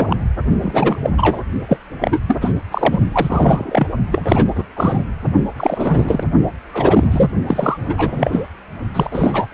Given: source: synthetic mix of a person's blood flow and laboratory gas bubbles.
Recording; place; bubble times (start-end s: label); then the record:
Doppler ultrasound of blood flow; precordium
0.00-0.17 s: bubbles
0.62-0.98 s: bubbles
1.02-1.10 s: bubbles
1.17-1.42 s: bubbles
1.69-1.78 s: bubbles
2.01-2.21 s: bubbles
2.27-2.53 s: bubbles
2.71-2.98 s: bubbles
3.12-3.87 s: bubbles
4.12-4.45 s: bubbles
4.55-4.63 s: bubbles
4.76-5.04 s: bubbles
5.56-6.24 s: bubbles
6.73-7.30 s: bubbles
7.46-7.77 s: bubbles
7.89-8.48 s: bubbles
8.94-9.47 s: bubbles
From the record:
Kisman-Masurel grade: 333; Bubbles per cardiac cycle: rolling drumbeat, 9 or more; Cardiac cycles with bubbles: 50 to 99%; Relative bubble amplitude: loud (0.450 to 0.775); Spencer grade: 3 (all of the cardiac periods contain showers or single bubble signals, but not dominating or overriding the cardiac motion signals); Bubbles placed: only in the low amplitude regions of the cardiac cycle